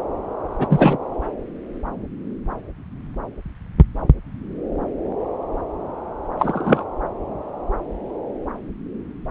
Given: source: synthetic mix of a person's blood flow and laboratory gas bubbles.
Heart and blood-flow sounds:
Doppler ultrasound of blood flow; subclavian vein
0.58-0.97 s: bubbles
6.39-6.84 s: bubbles
From the record:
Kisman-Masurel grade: 213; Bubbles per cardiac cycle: several, 3 to 8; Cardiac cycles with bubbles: 1 to 10%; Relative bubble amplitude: loud (0.450 to 0.775); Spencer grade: 1 (occasional bubble signal discernible with the cardiac motion signal, with majority of cardiac periods free of bubbles); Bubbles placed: anywhere in the cardiac cycle

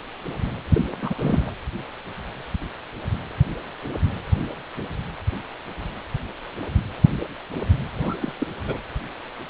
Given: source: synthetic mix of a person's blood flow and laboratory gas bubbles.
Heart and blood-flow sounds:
Doppler ultrasound of blood flow; precordium
0.74-0.85 s: bubbles
1.02-1.14 s: bubbles
1.19-1.54 s: bubbles
8.01-8.15 s: bubbles
8.20-8.34 s: bubbles
8.40-8.47 s: bubbles
8.67-8.78 s: bubbles
From the record:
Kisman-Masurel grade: 221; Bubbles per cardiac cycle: several, 3 to 8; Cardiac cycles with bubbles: 10 to 50%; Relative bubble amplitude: barely perceptible (0.100 to 0.250); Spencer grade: 2 (many but less than half of the cardiac periods contain bubble signals, singularly or in groups); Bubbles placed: anywhere in the cardiac cycle

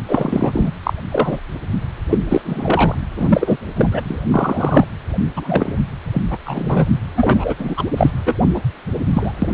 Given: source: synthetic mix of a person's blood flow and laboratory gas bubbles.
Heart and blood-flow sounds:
Doppler ultrasound of blood flow; precordium
0.08-0.72 s: bubbles
0.83-0.93 s: bubbles
1.08-1.41 s: bubbles
2.10-2.19 s: bubbles
2.29-2.42 s: bubbles
2.44-2.95 s: bubbles
3.17-3.57 s: bubbles
3.76-3.89 s: bubbles
3.92-4.01 s: bubbles
4.04-4.21 s: bubbles
4.30-4.87 s: bubbles
5.36-5.76 s: bubbles
6.13-6.22 s: bubbles
6.30-6.38 s: bubbles
6.45-6.87 s: bubbles
7.16-7.54 s: bubbles
7.58-7.84 s: bubbles
7.97-8.11 s: bubbles
8.26-8.35 s: bubbles
8.54-8.60 s: bubbles
9.13-9.32 s: bubbles
9.42-9.54 s: bubbles
From the record:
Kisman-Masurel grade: 243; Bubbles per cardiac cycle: several, 3 to 8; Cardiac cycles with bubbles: 100%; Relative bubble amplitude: loud (0.450 to 0.775); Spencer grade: 3 (all of the cardiac periods contain showers or single bubble signals, but not dominating or overriding the cardiac motion signals); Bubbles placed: anywhere in the cardiac cycle

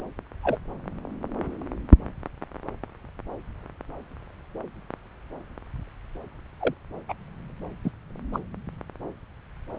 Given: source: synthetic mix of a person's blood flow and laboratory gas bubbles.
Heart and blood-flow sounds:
Doppler ultrasound of blood flow; subclavian vein
0.43-0.57 s: bubbles
6.61-6.74 s: bubbles
7.08-7.13 s: bubbles
7.84-7.91 s: bubbles
8.33-8.39 s: bubbles
From the record:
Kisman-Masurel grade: 122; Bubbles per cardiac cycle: 1 to 2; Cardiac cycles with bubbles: 10 to 50%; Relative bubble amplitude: moderate (0.250 to 0.450); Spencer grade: 2 (many but less than half of the cardiac periods contain bubble signals, singularly or in groups); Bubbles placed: anywhere in the cardiac cycle

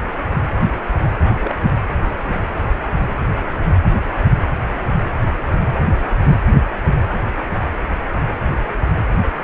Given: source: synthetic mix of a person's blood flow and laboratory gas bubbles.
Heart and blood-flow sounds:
Doppler ultrasound of blood flow; precordium
1.38-1.55 s: bubbles
From the record:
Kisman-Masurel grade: 111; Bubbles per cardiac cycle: 1 to 2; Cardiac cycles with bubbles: 1 to 10%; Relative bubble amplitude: barely perceptible (0.100 to 0.250); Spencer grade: 1 (occasional bubble signal discernible with the cardiac motion signal, with majority of cardiac periods free of bubbles); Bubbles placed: anywhere in the cardiac cycle

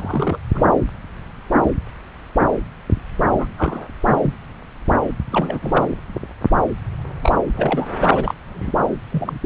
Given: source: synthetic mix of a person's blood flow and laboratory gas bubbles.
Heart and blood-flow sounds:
Doppler ultrasound of blood flow; subclavian vein
0.00-0.38 s: bubbles
0.53-0.66 s: bubbles
3.39-3.46 s: bubbles
3.57-3.88 s: bubbles
4.00-4.36 s: bubbles
5.31-5.86 s: bubbles
7.22-7.35 s: bubbles
7.56-7.87 s: bubbles
8.01-8.35 s: bubbles
8.47-8.84 s: bubbles
9.11-9.39 s: bubbles
From the record:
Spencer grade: 3 (all of the cardiac periods contain showers or single bubble signals, but not dominating or overriding the cardiac motion signals); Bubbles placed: anywhere in the cardiac cycle

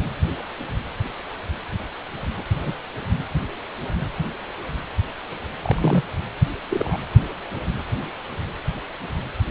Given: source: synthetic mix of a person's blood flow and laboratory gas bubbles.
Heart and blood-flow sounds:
Doppler ultrasound of blood flow; precordium
2.54-2.74 s: bubbles
5.63-6.02 s: bubbles
6.70-6.97 s: bubbles
From the record:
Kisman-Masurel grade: 122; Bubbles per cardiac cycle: 1 to 2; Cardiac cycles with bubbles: 10 to 50%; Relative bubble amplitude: moderate (0.250 to 0.450); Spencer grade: 2 (many but less than half of the cardiac periods contain bubble signals, singularly or in groups); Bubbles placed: anywhere in the cardiac cycle

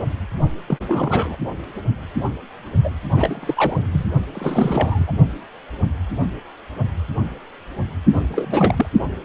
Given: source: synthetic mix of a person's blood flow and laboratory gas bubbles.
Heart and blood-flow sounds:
Doppler ultrasound of blood flow; precordium
0.68-0.77 s: bubbles
0.88-1.37 s: bubbles
2.83-2.90 s: bubbles
3.15-3.87 s: bubbles
3.92-4.05 s: bubbles
4.35-5.13 s: bubbles
8.13-8.25 s: bubbles
8.29-8.86 s: bubbles
From the record:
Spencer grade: 3 (all of the cardiac periods contain showers or single bubble signals, but not dominating or overriding the cardiac motion signals); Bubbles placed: only in the low amplitude regions of the cardiac cycle

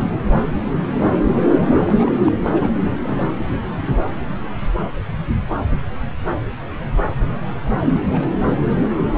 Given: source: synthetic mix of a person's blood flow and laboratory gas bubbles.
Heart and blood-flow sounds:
Doppler ultrasound of blood flow; subclavian vein
0.00-0.05 s: bubbles
1.54-1.60 s: bubbles
1.71-2.17 s: bubbles
2.27-2.32 s: bubbles
2.46-2.70 s: bubbles
2.85-2.96 s: bubbles
3.03-3.17 s: bubbles
3.21-3.28 s: bubbles
3.37-3.46 s: bubbles
7.65-7.70 s: bubbles
7.94-8.00 s: bubbles
8.13-8.27 s: bubbles
From the record:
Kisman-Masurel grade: 221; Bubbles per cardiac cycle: several, 3 to 8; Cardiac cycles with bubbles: 10 to 50%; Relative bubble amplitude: barely perceptible (0.100 to 0.250); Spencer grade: 2 (many but less than half of the cardiac periods contain bubble signals, singularly or in groups); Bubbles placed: anywhere in the cardiac cycle

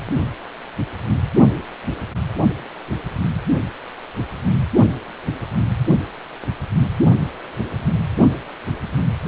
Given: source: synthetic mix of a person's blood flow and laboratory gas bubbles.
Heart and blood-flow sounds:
Doppler ultrasound of blood flow; precordium
no bubbles
From the record:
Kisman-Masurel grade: 000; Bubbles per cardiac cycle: 0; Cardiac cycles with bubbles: 0%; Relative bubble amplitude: no bubbles discernible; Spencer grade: 0 (complete lack of bubble signals)

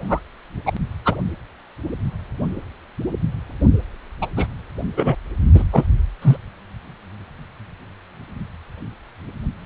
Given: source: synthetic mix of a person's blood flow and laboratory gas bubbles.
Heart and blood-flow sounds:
Doppler ultrasound of blood flow; precordium
0.00-0.20 s: bubbles
0.66-0.72 s: bubbles
1.05-1.15 s: bubbles
4.22-4.28 s: bubbles
4.37-4.47 s: bubbles
4.97-5.15 s: bubbles
5.54-5.64 s: bubbles
5.73-5.85 s: bubbles
6.22-6.37 s: bubbles
From the record:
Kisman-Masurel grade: 123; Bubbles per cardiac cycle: 1 to 2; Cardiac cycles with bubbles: 10 to 50%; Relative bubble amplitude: loud (0.450 to 0.775); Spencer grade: 2 (many but less than half of the cardiac periods contain bubble signals, singularly or in groups); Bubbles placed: anywhere in the cardiac cycle

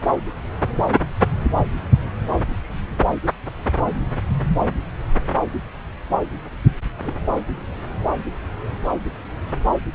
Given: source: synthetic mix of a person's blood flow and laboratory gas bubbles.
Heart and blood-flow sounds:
Doppler ultrasound of blood flow; subclavian vein
7.02-7.14 s: bubbles
From the record:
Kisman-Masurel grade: 111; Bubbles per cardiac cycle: 1 to 2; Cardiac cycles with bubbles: 1 to 10%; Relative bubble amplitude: barely perceptible (0.100 to 0.250); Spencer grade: 1 (occasional bubble signal discernible with the cardiac motion signal, with majority of cardiac periods free of bubbles); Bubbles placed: anywhere in the cardiac cycle

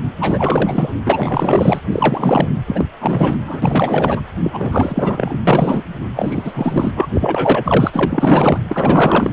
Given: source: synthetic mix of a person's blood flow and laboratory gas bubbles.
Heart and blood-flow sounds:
Doppler ultrasound of blood flow; precordium
0.20-0.91 s: bubbles
1.04-1.79 s: bubbles
1.92-2.48 s: bubbles
2.67-2.85 s: bubbles
3.02-3.38 s: bubbles
3.46-4.21 s: bubbles
4.43-5.37 s: bubbles
5.47-5.83 s: bubbles
6.15-6.92 s: bubbles
6.95-7.06 s: bubbles
7.14-8.58 s: bubbles
8.69-9.33 s: bubbles
From the record:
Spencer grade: 4 (maximum detectable bubble signal sounding continuously throughout systole and diastole of every cardiac period, and overriding the amplitude of the normal cardiac signals); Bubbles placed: anywhere in the cardiac cycle

